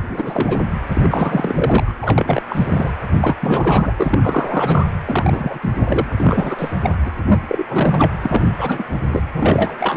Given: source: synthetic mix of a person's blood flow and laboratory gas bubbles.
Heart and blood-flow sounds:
Doppler ultrasound of blood flow; precordium
0.08-0.60 s: bubbles
0.88-1.95 s: bubbles
2.02-2.42 s: bubbles
2.50-2.91 s: bubbles
3.21-3.35 s: bubbles
3.41-3.93 s: bubbles
3.96-4.86 s: bubbles
5.05-5.60 s: bubbles
5.62-5.72 s: bubbles
5.78-6.07 s: bubbles
6.17-6.55 s: bubbles
6.58-6.74 s: bubbles
6.83-6.96 s: bubbles
7.06-7.11 s: bubbles
7.29-7.43 s: bubbles
7.49-7.64 s: bubbles
7.69-8.12 s: bubbles
8.22-8.47 s: bubbles
8.58-8.84 s: bubbles
9.11-9.21 s: bubbles
9.34-9.77 s: bubbles
9.79-9.97 s: bubbles
From the record:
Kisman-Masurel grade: 342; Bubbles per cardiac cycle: rolling drumbeat, 9 or more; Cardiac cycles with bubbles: 100%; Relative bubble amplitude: moderate (0.250 to 0.450); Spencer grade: 3 (all of the cardiac periods contain showers or single bubble signals, but not dominating or overriding the cardiac motion signals); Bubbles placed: anywhere in the cardiac cycle

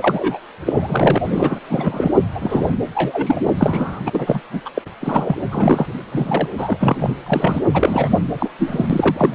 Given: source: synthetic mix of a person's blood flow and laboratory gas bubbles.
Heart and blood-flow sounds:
Doppler ultrasound of blood flow; precordium
0.00-0.40 s: bubbles
0.66-1.18 s: bubbles
1.24-1.59 s: bubbles
1.69-2.12 s: bubbles
2.34-2.75 s: bubbles
2.95-3.41 s: bubbles
3.43-3.51 s: bubbles
3.56-4.00 s: bubbles
4.06-4.41 s: bubbles
4.52-4.61 s: bubbles
4.65-4.70 s: bubbles
4.74-4.82 s: bubbles
5.00-5.35 s: bubbles
5.51-5.96 s: bubbles
6.11-6.47 s: bubbles
6.58-7.14 s: bubbles
7.26-7.61 s: bubbles
7.73-8.19 s: bubbles
8.34-8.49 s: bubbles
8.59-8.87 s: bubbles
8.90-9.34 s: bubbles
From the record:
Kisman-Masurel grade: 242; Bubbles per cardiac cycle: several, 3 to 8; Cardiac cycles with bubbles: 100%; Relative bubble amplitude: moderate (0.250 to 0.450); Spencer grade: 3 (all of the cardiac periods contain showers or single bubble signals, but not dominating or overriding the cardiac motion signals); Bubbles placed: anywhere in the cardiac cycle

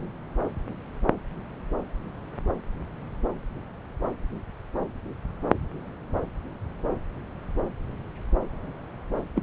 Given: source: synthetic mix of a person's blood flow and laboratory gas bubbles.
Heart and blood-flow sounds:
Doppler ultrasound of blood flow; subclavian vein
9.36-9.43 s: bubbles
From the record:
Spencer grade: 1 (occasional bubble signal discernible with the cardiac motion signal, with majority of cardiac periods free of bubbles); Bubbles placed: anywhere in the cardiac cycle

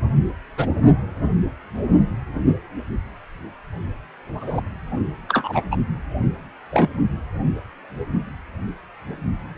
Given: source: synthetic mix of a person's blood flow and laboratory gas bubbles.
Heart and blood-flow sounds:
Doppler ultrasound of blood flow; precordium
0.57-0.67 s: bubbles
4.41-4.62 s: bubbles
5.28-5.62 s: bubbles
5.71-5.76 s: bubbles
6.71-6.89 s: bubbles
From the record:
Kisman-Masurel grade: 123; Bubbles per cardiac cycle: 1 to 2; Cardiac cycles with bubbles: 10 to 50%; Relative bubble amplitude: loud (0.450 to 0.775); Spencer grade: 2 (many but less than half of the cardiac periods contain bubble signals, singularly or in groups); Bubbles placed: only in the low amplitude regions of the cardiac cycle

